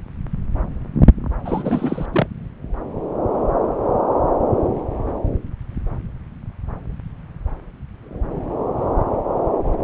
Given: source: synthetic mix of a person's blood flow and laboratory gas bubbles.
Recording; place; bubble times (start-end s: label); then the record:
Doppler ultrasound of blood flow; subclavian vein
1.44-2.06 s: bubbles
2.12-2.27 s: bubbles
From the record:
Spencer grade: 1 (occasional bubble signal discernible with the cardiac motion signal, with majority of cardiac periods free of bubbles); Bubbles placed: anywhere in the cardiac cycle